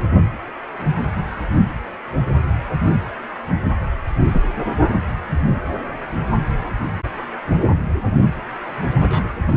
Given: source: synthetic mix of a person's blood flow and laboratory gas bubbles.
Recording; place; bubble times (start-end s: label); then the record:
Doppler ultrasound of blood flow; precordium
4.32-4.41 s: bubbles
9.01-9.34 s: bubbles
9.42-9.57 s: bubbles
From the record:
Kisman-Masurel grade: 122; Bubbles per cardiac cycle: 1 to 2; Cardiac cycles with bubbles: 10 to 50%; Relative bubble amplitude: moderate (0.250 to 0.450); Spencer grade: 2 (many but less than half of the cardiac periods contain bubble signals, singularly or in groups); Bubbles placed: anywhere in the cardiac cycle